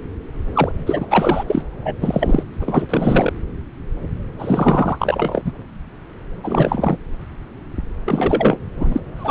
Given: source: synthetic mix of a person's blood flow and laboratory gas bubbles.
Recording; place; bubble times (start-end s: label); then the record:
Doppler ultrasound of blood flow; subclavian vein
0.54-0.72 s: bubbles
0.86-1.06 s: bubbles
1.09-1.44 s: bubbles
1.48-1.62 s: bubbles
1.85-1.96 s: bubbles
2.01-2.43 s: bubbles
2.59-2.86 s: bubbles
2.89-3.33 s: bubbles
4.39-5.52 s: bubbles
6.44-6.98 s: bubbles
8.05-8.59 s: bubbles
8.77-9.01 s: bubbles
9.16-9.31 s: bubbles
From the record:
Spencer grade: 3 (all of the cardiac periods contain showers or single bubble signals, but not dominating or overriding the cardiac motion signals); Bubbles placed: anywhere in the cardiac cycle